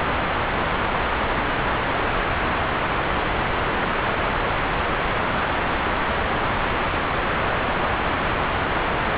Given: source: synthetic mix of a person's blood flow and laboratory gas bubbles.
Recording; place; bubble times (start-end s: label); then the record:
Doppler ultrasound of blood flow; subclavian vein
no bubbles
From the record:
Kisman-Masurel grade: 000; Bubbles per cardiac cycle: 0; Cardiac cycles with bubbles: 0%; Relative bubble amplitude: no bubbles discernible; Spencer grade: 0 (complete lack of bubble signals)